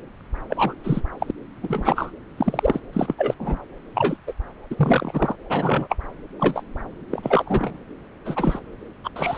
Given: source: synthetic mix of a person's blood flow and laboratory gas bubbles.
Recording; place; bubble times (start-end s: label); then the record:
Doppler ultrasound of blood flow; subclavian vein
0.49-0.73 s: bubbles
0.84-1.01 s: bubbles
1.21-1.31 s: bubbles
1.63-2.11 s: bubbles
2.37-2.79 s: bubbles
2.93-3.14 s: bubbles
3.18-3.34 s: bubbles
3.39-3.58 s: bubbles
3.94-4.17 s: bubbles
4.26-4.32 s: bubbles
4.70-5.35 s: bubbles
5.49-5.96 s: bubbles
6.39-6.62 s: bubbles
7.11-7.79 s: bubbles
8.25-8.59 s: bubbles
9.04-9.09 s: bubbles
9.15-9.38 s: bubbles
From the record:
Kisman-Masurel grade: 232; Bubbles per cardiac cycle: several, 3 to 8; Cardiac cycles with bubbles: 50 to 99%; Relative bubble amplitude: moderate (0.250 to 0.450); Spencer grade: 3 (all of the cardiac periods contain showers or single bubble signals, but not dominating or overriding the cardiac motion signals); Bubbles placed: anywhere in the cardiac cycle